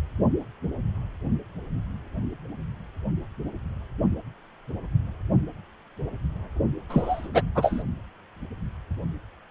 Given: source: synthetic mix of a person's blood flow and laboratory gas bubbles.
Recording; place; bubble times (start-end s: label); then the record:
Doppler ultrasound of blood flow; precordium
6.89-7.29 s: bubbles
7.33-7.42 s: bubbles
7.55-7.83 s: bubbles
From the record:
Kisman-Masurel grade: 213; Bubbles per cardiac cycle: several, 3 to 8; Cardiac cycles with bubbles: 1 to 10%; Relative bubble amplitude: loud (0.450 to 0.775); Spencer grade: 1 (occasional bubble signal discernible with the cardiac motion signal, with majority of cardiac periods free of bubbles); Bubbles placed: only in the low amplitude regions of the cardiac cycle